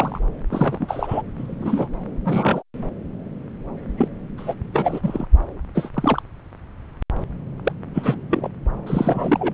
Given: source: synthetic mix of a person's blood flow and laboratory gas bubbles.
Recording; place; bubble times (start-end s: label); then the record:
Doppler ultrasound of blood flow; subclavian vein
0.00-0.20 s: bubbles
0.51-1.21 s: bubbles
1.38-1.87 s: bubbles
2.25-2.62 s: bubbles
3.97-4.08 s: bubbles
4.38-4.54 s: bubbles
4.73-5.26 s: bubbles
5.75-5.90 s: bubbles
5.94-6.22 s: bubbles
7.64-7.72 s: bubbles
7.94-8.20 s: bubbles
8.30-8.49 s: bubbles
8.87-9.54 s: bubbles
From the record:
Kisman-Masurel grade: 232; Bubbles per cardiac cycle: several, 3 to 8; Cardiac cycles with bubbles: 50 to 99%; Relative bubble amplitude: moderate (0.250 to 0.450); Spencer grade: 3 (all of the cardiac periods contain showers or single bubble signals, but not dominating or overriding the cardiac motion signals); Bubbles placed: anywhere in the cardiac cycle